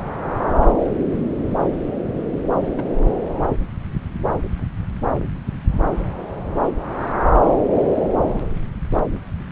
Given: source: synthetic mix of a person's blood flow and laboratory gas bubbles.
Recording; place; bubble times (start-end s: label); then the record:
Doppler ultrasound of blood flow; subclavian vein
2.64-2.74 s: bubbles
2.77-2.84 s: bubbles
From the record:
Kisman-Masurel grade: 111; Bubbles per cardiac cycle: 1 to 2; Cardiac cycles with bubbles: 1 to 10%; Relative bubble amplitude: barely perceptible (0.100 to 0.250); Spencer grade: 1 (occasional bubble signal discernible with the cardiac motion signal, with majority of cardiac periods free of bubbles); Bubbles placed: anywhere in the cardiac cycle